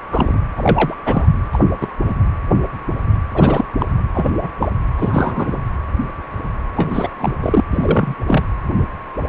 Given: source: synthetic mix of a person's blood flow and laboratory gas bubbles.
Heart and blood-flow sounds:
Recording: Doppler ultrasound of blood flow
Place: precordium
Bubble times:
0.11-0.41 s: bubbles
0.57-0.95 s: bubbles
1.05-1.27 s: bubbles
1.53-1.59 s: bubbles
1.81-1.88 s: bubbles
2.08-2.16 s: bubbles
3.33-3.65 s: bubbles
3.79-3.86 s: bubbles
4.14-4.30 s: bubbles
4.41-4.50 s: bubbles
4.60-4.68 s: bubbles
4.97-5.57 s: bubbles
6.76-7.09 s: bubbles
7.20-7.34 s: bubbles
7.42-7.63 s: bubbles
7.71-8.15 s: bubbles
8.27-8.44 s: bubbles
From the record:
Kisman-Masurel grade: 233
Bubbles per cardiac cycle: several, 3 to 8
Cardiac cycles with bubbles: 50 to 99%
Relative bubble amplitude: loud (0.450 to 0.775)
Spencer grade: 3 (all of the cardiac periods contain showers or single bubble signals, but not dominating or overriding the cardiac motion signals)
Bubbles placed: anywhere in the cardiac cycle

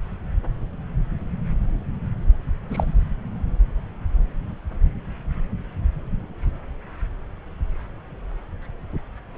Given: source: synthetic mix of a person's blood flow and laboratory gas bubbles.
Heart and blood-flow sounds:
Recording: Doppler ultrasound of blood flow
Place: subclavian vein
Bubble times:
2.69-2.94 s: bubbles
From the record:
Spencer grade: 1 (occasional bubble signal discernible with the cardiac motion signal, with majority of cardiac periods free of bubbles)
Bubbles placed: anywhere in the cardiac cycle

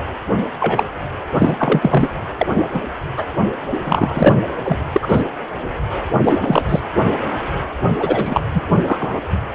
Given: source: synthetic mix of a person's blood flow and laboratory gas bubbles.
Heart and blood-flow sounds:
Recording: Doppler ultrasound of blood flow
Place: precordium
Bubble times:
0.59-0.83 s: bubbles
1.38-2.08 s: bubbles
2.38-2.46 s: bubbles
2.73-2.79 s: bubbles
3.17-3.24 s: bubbles
3.71-3.81 s: bubbles
3.84-4.34 s: bubbles
4.64-4.78 s: bubbles
4.92-5.21 s: bubbles
6.23-6.80 s: bubbles
7.99-8.45 s: bubbles
8.54-8.62 s: bubbles
8.86-9.20 s: bubbles
From the record:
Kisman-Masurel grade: 233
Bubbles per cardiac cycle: several, 3 to 8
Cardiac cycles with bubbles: 50 to 99%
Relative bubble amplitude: loud (0.450 to 0.775)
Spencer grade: 3 (all of the cardiac periods contain showers or single bubble signals, but not dominating or overriding the cardiac motion signals)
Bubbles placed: anywhere in the cardiac cycle

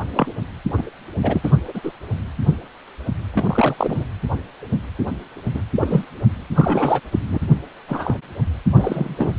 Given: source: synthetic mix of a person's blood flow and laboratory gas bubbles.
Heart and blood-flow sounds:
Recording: Doppler ultrasound of blood flow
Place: precordium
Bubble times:
0.13-0.30 s: bubbles
0.77-0.83 s: bubbles
1.23-1.41 s: bubbles
1.44-1.51 s: bubbles
1.68-1.92 s: bubbles
3.30-3.76 s: bubbles
3.79-4.04 s: bubbles
5.54-5.62 s: bubbles
5.75-6.04 s: bubbles
6.55-7.01 s: bubbles
7.12-7.19 s: bubbles
7.30-7.38 s: bubbles
7.88-8.18 s: bubbles
8.75-9.35 s: bubbles
From the record:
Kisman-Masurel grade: 232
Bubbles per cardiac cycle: several, 3 to 8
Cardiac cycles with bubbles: 50 to 99%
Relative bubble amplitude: moderate (0.250 to 0.450)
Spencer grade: 3 (all of the cardiac periods contain showers or single bubble signals, but not dominating or overriding the cardiac motion signals)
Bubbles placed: anywhere in the cardiac cycle

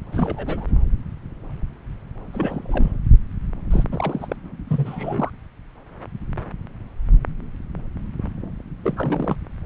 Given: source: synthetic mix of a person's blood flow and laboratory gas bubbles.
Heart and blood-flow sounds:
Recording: Doppler ultrasound of blood flow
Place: subclavian vein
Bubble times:
0.12-0.66 s: bubbles
2.33-2.99 s: bubbles
3.70-3.83 s: bubbles
3.92-4.35 s: bubbles
4.67-5.30 s: bubbles
8.83-9.36 s: bubbles
From the record:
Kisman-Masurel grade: 221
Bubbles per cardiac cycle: several, 3 to 8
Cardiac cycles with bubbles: 10 to 50%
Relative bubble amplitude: barely perceptible (0.100 to 0.250)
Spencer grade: 2 (many but less than half of the cardiac periods contain bubble signals, singularly or in groups)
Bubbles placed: anywhere in the cardiac cycle

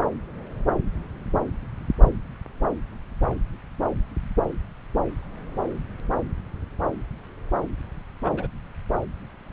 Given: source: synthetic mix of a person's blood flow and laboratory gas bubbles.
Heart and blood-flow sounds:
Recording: Doppler ultrasound of blood flow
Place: subclavian vein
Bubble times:
8.25-8.47 s: bubbles
From the record:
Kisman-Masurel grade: 111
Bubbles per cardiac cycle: 1 to 2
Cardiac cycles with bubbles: 1 to 10%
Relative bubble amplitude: barely perceptible (0.100 to 0.250)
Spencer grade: 1 (occasional bubble signal discernible with the cardiac motion signal, with majority of cardiac periods free of bubbles)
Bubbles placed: anywhere in the cardiac cycle

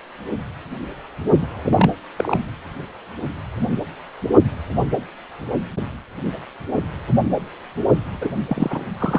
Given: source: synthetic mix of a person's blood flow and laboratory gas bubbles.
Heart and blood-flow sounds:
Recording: Doppler ultrasound of blood flow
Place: precordium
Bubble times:
1.41-1.92 s: bubbles
2.17-2.41 s: bubbles
8.21-8.31 s: bubbles
8.46-8.87 s: bubbles
8.99-9.19 s: bubbles
From the record:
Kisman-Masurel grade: 222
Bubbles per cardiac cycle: several, 3 to 8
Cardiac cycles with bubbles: 10 to 50%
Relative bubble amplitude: moderate (0.250 to 0.450)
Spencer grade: 2 (many but less than half of the cardiac periods contain bubble signals, singularly or in groups)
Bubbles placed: only in the low amplitude regions of the cardiac cycle

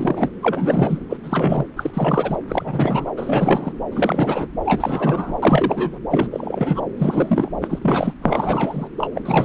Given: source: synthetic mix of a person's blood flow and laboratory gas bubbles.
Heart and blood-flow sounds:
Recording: Doppler ultrasound of blood flow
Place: subclavian vein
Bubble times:
0.00-0.30 s: bubbles
0.43-0.99 s: bubbles
1.09-1.17 s: bubbles
1.24-1.66 s: bubbles
1.77-1.90 s: bubbles
1.94-2.36 s: bubbles
2.48-3.11 s: bubbles
3.17-3.72 s: bubbles
3.91-4.47 s: bubbles
4.65-5.37 s: bubbles
5.42-5.98 s: bubbles
6.11-6.27 s: bubbles
6.31-6.81 s: bubbles
6.96-7.50 s: bubbles
7.62-7.79 s: bubbles
7.81-8.13 s: bubbles
8.22-8.88 s: bubbles
8.98-9.09 s: bubbles
9.15-9.21 s: bubbles
9.25-9.45 s: bubbles
From the record:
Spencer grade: 3 (all of the cardiac periods contain showers or single bubble signals, but not dominating or overriding the cardiac motion signals)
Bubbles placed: anywhere in the cardiac cycle

